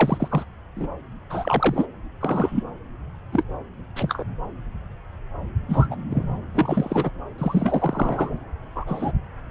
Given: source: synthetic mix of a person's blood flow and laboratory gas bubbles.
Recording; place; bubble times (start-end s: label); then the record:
Doppler ultrasound of blood flow; subclavian vein
0.00-0.45 s: bubbles
0.76-0.88 s: bubbles
1.29-1.86 s: bubbles
2.21-2.63 s: bubbles
3.32-3.43 s: bubbles
3.96-4.23 s: bubbles
5.68-5.88 s: bubbles
5.91-5.96 s: bubbles
6.10-6.27 s: bubbles
6.54-7.10 s: bubbles
7.38-8.38 s: bubbles
8.75-9.12 s: bubbles
From the record:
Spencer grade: 3 (all of the cardiac periods contain showers or single bubble signals, but not dominating or overriding the cardiac motion signals); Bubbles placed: anywhere in the cardiac cycle